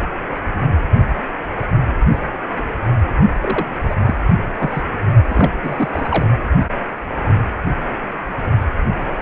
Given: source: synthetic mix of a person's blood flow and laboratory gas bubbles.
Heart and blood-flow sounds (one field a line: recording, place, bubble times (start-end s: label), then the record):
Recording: Doppler ultrasound of blood flow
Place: precordium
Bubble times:
3.41-3.67 s: bubbles
3.89-3.95 s: bubbles
4.05-4.15 s: bubbles
4.59-4.83 s: bubbles
5.27-5.52 s: bubbles
5.63-6.30 s: bubbles
From the record:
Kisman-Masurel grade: 222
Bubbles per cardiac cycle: several, 3 to 8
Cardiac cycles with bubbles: 10 to 50%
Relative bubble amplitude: moderate (0.250 to 0.450)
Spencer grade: 2 (many but less than half of the cardiac periods contain bubble signals, singularly or in groups)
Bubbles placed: only in the low amplitude regions of the cardiac cycle